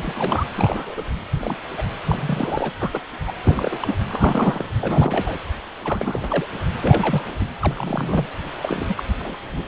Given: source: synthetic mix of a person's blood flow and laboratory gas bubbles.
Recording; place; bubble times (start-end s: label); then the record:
Doppler ultrasound of blood flow; precordium
0.00-0.46 s: bubbles
0.54-1.01 s: bubbles
1.40-1.56 s: bubbles
1.77-1.82 s: bubbles
2.05-2.73 s: bubbles
2.79-3.00 s: bubbles
3.27-3.33 s: bubbles
3.44-3.78 s: bubbles
3.81-3.94 s: bubbles
4.08-4.65 s: bubbles
4.80-5.38 s: bubbles
5.84-6.46 s: bubbles
6.82-7.28 s: bubbles
7.40-7.45 s: bubbles
7.61-8.26 s: bubbles
8.62-9.03 s: bubbles
9.19-9.35 s: bubbles
9.52-9.62 s: bubbles
From the record:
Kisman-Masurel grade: 232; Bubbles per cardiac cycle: several, 3 to 8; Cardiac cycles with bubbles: 50 to 99%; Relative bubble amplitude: moderate (0.250 to 0.450); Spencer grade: 3 (all of the cardiac periods contain showers or single bubble signals, but not dominating or overriding the cardiac motion signals); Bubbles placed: anywhere in the cardiac cycle